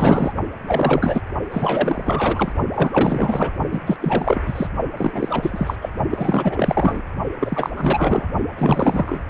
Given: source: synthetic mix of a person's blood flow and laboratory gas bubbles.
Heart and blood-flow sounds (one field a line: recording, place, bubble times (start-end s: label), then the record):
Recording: Doppler ultrasound of blood flow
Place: precordium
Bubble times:
0.00-0.32 s: bubbles
0.66-1.22 s: bubbles
1.51-2.52 s: bubbles
2.75-3.51 s: bubbles
3.71-3.80 s: bubbles
3.86-3.96 s: bubbles
4.00-4.42 s: bubbles
4.46-4.67 s: bubbles
4.97-5.76 s: bubbles
5.81-5.91 s: bubbles
6.10-7.01 s: bubbles
7.40-7.70 s: bubbles
7.76-8.27 s: bubbles
8.57-9.21 s: bubbles
From the record:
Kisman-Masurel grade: 444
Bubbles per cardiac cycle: continuous sound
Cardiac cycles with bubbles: 100%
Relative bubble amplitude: maximal (0.775 to 0.999)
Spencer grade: 4 (maximum detectable bubble signal sounding continuously throughout systole and diastole of every cardiac period, and overriding the amplitude of the normal cardiac signals)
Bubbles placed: only in the low amplitude regions of the cardiac cycle